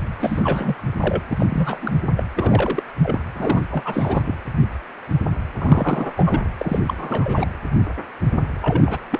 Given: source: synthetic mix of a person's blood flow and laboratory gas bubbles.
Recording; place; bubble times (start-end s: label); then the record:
Doppler ultrasound of blood flow; precordium
0.18-0.76 s: bubbles
1.01-1.23 s: bubbles
1.28-1.46 s: bubbles
1.50-1.97 s: bubbles
2.17-2.24 s: bubbles
2.36-2.83 s: bubbles
3.03-3.19 s: bubbles
3.35-3.61 s: bubbles
3.70-4.35 s: bubbles
5.58-6.13 s: bubbles
6.17-6.41 s: bubbles
6.58-6.79 s: bubbles
6.87-7.51 s: bubbles
8.61-8.98 s: bubbles
9.12-9.19 s: bubbles
From the record:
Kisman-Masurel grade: 332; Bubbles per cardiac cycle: rolling drumbeat, 9 or more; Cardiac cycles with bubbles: 50 to 99%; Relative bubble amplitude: moderate (0.250 to 0.450); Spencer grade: 3 (all of the cardiac periods contain showers or single bubble signals, but not dominating or overriding the cardiac motion signals); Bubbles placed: anywhere in the cardiac cycle